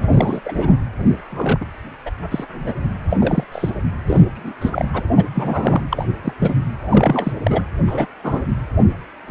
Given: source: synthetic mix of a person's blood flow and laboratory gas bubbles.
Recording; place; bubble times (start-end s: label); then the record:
Doppler ultrasound of blood flow; precordium
0.10-0.40 s: bubbles
0.45-0.70 s: bubbles
1.31-1.65 s: bubbles
2.06-2.10 s: bubbles
2.31-2.44 s: bubbles
2.52-2.73 s: bubbles
3.10-3.17 s: bubbles
3.20-3.44 s: bubbles
3.52-3.70 s: bubbles
4.07-4.24 s: bubbles
4.34-4.53 s: bubbles
4.61-4.86 s: bubbles
4.93-5.02 s: bubbles
5.17-5.25 s: bubbles
5.32-5.82 s: bubbles
5.90-6.04 s: bubbles
6.23-6.33 s: bubbles
6.40-6.55 s: bubbles
6.89-7.32 s: bubbles
7.43-7.62 s: bubbles
7.86-8.06 s: bubbles
8.23-8.47 s: bubbles
From the record:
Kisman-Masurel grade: 232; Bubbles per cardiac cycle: several, 3 to 8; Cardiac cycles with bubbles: 50 to 99%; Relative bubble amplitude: moderate (0.250 to 0.450); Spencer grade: 3 (all of the cardiac periods contain showers or single bubble signals, but not dominating or overriding the cardiac motion signals); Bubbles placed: anywhere in the cardiac cycle